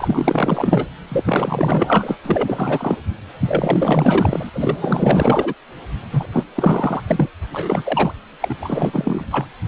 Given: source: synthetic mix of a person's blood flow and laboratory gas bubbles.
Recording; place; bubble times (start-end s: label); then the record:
Doppler ultrasound of blood flow; precordium
0.00-0.90 s: bubbles
1.08-2.15 s: bubbles
2.23-2.97 s: bubbles
3.45-4.50 s: bubbles
4.54-5.54 s: bubbles
6.12-6.25 s: bubbles
6.32-6.43 s: bubbles
6.55-7.02 s: bubbles
7.07-7.31 s: bubbles
7.52-8.14 s: bubbles
8.41-8.55 s: bubbles
8.62-9.24 s: bubbles
9.30-9.46 s: bubbles
From the record:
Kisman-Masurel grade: 444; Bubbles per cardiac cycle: continuous sound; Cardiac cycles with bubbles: 100%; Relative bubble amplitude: maximal (0.775 to 0.999); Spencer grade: 4 (maximum detectable bubble signal sounding continuously throughout systole and diastole of every cardiac period, and overriding the amplitude of the normal cardiac signals); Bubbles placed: anywhere in the cardiac cycle